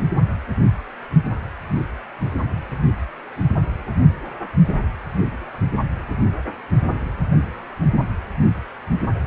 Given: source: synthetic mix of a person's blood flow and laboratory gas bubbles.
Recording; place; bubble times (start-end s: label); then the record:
Doppler ultrasound of blood flow; precordium
no bubbles
From the record:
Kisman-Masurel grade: 000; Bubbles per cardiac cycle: 0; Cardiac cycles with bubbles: 0%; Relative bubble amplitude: no bubbles discernible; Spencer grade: 0 (complete lack of bubble signals)